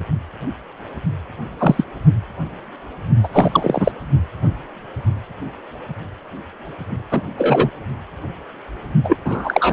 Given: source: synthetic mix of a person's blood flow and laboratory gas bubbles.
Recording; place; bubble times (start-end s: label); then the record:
Doppler ultrasound of blood flow; precordium
1.58-1.84 s: bubbles
3.23-3.28 s: bubbles
3.33-3.92 s: bubbles
7.11-7.23 s: bubbles
7.37-7.71 s: bubbles
9.04-9.16 s: bubbles
9.24-9.73 s: bubbles
From the record:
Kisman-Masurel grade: 233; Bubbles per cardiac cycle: several, 3 to 8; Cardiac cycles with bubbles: 50 to 99%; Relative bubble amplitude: loud (0.450 to 0.775); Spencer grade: 3 (all of the cardiac periods contain showers or single bubble signals, but not dominating or overriding the cardiac motion signals); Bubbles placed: only in the low amplitude regions of the cardiac cycle